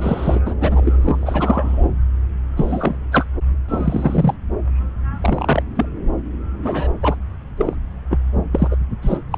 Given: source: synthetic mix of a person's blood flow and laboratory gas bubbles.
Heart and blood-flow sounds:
Doppler ultrasound of blood flow; subclavian vein
0.00-0.41 s: bubbles
0.45-0.55 s: bubbles
0.60-0.80 s: bubbles
0.83-1.87 s: bubbles
2.56-2.97 s: bubbles
3.12-3.25 s: bubbles
3.68-4.34 s: bubbles
5.21-5.62 s: bubbles
5.75-5.86 s: bubbles
6.62-6.88 s: bubbles
7.01-7.16 s: bubbles
7.57-7.75 s: bubbles
8.10-8.19 s: bubbles
8.52-8.68 s: bubbles
8.71-8.76 s: bubbles
9.02-9.17 s: bubbles
9.31-9.38 s: bubbles
From the record:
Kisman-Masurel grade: 243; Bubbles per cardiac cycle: several, 3 to 8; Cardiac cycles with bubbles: 100%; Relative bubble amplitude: loud (0.450 to 0.775); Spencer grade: 3 (all of the cardiac periods contain showers or single bubble signals, but not dominating or overriding the cardiac motion signals); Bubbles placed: anywhere in the cardiac cycle

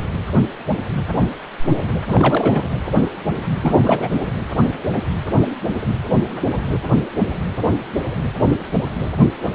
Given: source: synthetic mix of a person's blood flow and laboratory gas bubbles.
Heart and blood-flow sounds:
Doppler ultrasound of blood flow; precordium
2.04-2.69 s: bubbles
3.62-4.10 s: bubbles
From the record:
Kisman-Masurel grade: 222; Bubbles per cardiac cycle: several, 3 to 8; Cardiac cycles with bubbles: 10 to 50%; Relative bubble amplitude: moderate (0.250 to 0.450); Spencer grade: 2 (many but less than half of the cardiac periods contain bubble signals, singularly or in groups); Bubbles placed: anywhere in the cardiac cycle

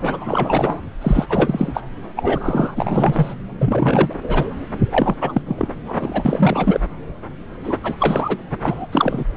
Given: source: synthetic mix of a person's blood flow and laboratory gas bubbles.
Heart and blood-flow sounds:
Doppler ultrasound of blood flow; subclavian vein
0.00-0.81 s: bubbles
1.01-1.27 s: bubbles
1.29-1.81 s: bubbles
2.16-3.35 s: bubbles
3.59-4.13 s: bubbles
4.23-4.48 s: bubbles
4.90-5.15 s: bubbles
5.21-5.42 s: bubbles
5.46-5.73 s: bubbles
5.84-6.80 s: bubbles
7.63-7.77 s: bubbles
7.83-7.96 s: bubbles
7.99-8.38 s: bubbles
8.62-8.87 s: bubbles
8.92-9.24 s: bubbles
From the record:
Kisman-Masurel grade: 333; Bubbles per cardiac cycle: rolling drumbeat, 9 or more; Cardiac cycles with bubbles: 50 to 99%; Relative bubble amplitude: loud (0.450 to 0.775); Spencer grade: 3 (all of the cardiac periods contain showers or single bubble signals, but not dominating or overriding the cardiac motion signals); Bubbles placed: anywhere in the cardiac cycle

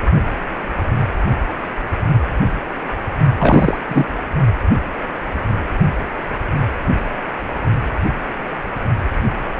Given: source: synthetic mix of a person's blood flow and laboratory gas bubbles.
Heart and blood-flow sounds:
Doppler ultrasound of blood flow; precordium
3.38-3.77 s: bubbles
3.88-4.05 s: bubbles
From the record:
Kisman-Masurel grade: 223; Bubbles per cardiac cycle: several, 3 to 8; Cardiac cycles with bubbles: 10 to 50%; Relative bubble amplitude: loud (0.450 to 0.775); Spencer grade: 2 (many but less than half of the cardiac periods contain bubble signals, singularly or in groups); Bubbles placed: only in the low amplitude regions of the cardiac cycle

